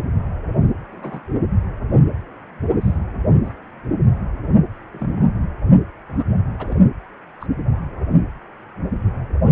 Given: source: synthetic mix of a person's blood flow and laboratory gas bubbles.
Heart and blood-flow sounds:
Doppler ultrasound of blood flow; precordium
0.93-1.22 s: bubbles
2.81-2.96 s: bubbles
3.44-3.54 s: bubbles
4.93-5.22 s: bubbles
6.08-6.24 s: bubbles
6.58-6.76 s: bubbles
7.40-7.46 s: bubbles
From the record:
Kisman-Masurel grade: 121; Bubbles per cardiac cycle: 1 to 2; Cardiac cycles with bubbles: 10 to 50%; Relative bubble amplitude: barely perceptible (0.100 to 0.250); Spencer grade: 2 (many but less than half of the cardiac periods contain bubble signals, singularly or in groups); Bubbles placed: anywhere in the cardiac cycle

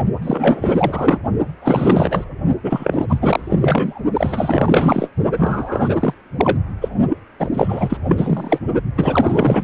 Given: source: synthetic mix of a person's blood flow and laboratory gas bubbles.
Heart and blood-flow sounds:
Doppler ultrasound of blood flow; precordium
0.22-1.18 s: bubbles
1.61-2.25 s: bubbles
2.64-3.19 s: bubbles
3.22-4.02 s: bubbles
4.13-5.09 s: bubbles
5.36-5.97 s: bubbles
6.00-6.13 s: bubbles
6.38-6.59 s: bubbles
6.80-6.88 s: bubbles
7.08-7.17 s: bubbles
7.39-7.49 s: bubbles
7.52-7.97 s: bubbles
8.08-8.60 s: bubbles
8.96-9.63 s: bubbles
From the record:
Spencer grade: 4 (maximum detectable bubble signal sounding continuously throughout systole and diastole of every cardiac period, and overriding the amplitude of the normal cardiac signals); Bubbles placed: only in the low amplitude regions of the cardiac cycle

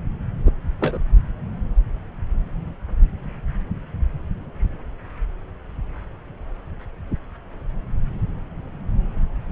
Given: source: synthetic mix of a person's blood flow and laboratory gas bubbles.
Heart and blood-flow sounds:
Doppler ultrasound of blood flow; subclavian vein
0.46-0.51 s: bubbles
0.80-0.98 s: bubbles
From the record:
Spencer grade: 1 (occasional bubble signal discernible with the cardiac motion signal, with majority of cardiac periods free of bubbles); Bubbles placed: anywhere in the cardiac cycle

